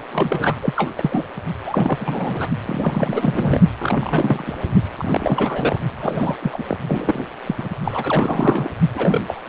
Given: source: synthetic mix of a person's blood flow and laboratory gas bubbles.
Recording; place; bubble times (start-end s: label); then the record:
Doppler ultrasound of blood flow; precordium
0.12-0.56 s: bubbles
0.62-0.90 s: bubbles
0.97-1.24 s: bubbles
1.65-2.49 s: bubbles
2.66-3.61 s: bubbles
3.79-4.53 s: bubbles
4.97-5.78 s: bubbles
6.00-6.37 s: bubbles
6.42-6.63 s: bubbles
6.67-6.78 s: bubbles
6.87-7.25 s: bubbles
7.46-7.68 s: bubbles
7.83-8.72 s: bubbles
8.95-9.21 s: bubbles
9.27-9.43 s: bubbles
From the record:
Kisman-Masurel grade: 342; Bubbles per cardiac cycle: rolling drumbeat, 9 or more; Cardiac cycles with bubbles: 100%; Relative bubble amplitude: moderate (0.250 to 0.450); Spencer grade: 3 (all of the cardiac periods contain showers or single bubble signals, but not dominating or overriding the cardiac motion signals); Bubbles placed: only in the low amplitude regions of the cardiac cycle